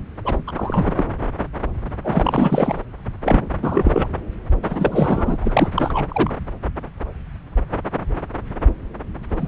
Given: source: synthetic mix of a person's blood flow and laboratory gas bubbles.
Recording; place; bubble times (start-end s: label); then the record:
Doppler ultrasound of blood flow; subclavian vein
0.00-0.02 s: bubbles
0.24-0.36 s: bubbles
0.47-0.52 s: bubbles
0.55-1.04 s: bubbles
2.04-2.82 s: bubbles
3.21-3.50 s: bubbles
3.54-4.07 s: bubbles
4.62-5.38 s: bubbles
5.41-5.69 s: bubbles
5.74-6.33 s: bubbles
9.29-9.48 s: bubbles
From the record:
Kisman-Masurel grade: 332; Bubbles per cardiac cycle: rolling drumbeat, 9 or more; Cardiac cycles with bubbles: 50 to 99%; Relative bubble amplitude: moderate (0.250 to 0.450); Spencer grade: 3 (all of the cardiac periods contain showers or single bubble signals, but not dominating or overriding the cardiac motion signals); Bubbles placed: anywhere in the cardiac cycle